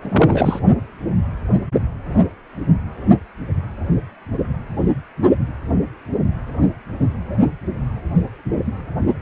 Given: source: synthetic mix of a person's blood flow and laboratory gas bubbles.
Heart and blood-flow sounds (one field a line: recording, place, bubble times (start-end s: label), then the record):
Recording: Doppler ultrasound of blood flow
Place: precordium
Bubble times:
0.01-0.60 s: bubbles
From the record:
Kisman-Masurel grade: 223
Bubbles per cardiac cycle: several, 3 to 8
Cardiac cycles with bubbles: 10 to 50%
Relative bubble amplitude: loud (0.450 to 0.775)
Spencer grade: 2 (many but less than half of the cardiac periods contain bubble signals, singularly or in groups)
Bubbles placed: only in the low amplitude regions of the cardiac cycle